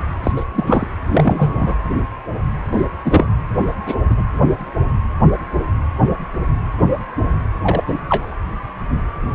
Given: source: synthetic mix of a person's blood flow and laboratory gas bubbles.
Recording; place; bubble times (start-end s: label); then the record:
Doppler ultrasound of blood flow; precordium
0.23-0.32 s: bubbles
0.35-0.44 s: bubbles
0.55-0.87 s: bubbles
1.10-1.75 s: bubbles
2.71-2.85 s: bubbles
3.03-3.27 s: bubbles
3.86-3.96 s: bubbles
4.09-4.23 s: bubbles
7.63-7.84 s: bubbles
7.88-7.94 s: bubbles
8.08-8.35 s: bubbles
From the record:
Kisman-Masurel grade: 223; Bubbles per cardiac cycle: several, 3 to 8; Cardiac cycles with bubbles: 10 to 50%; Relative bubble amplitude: loud (0.450 to 0.775); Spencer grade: 2 (many but less than half of the cardiac periods contain bubble signals, singularly or in groups); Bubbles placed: anywhere in the cardiac cycle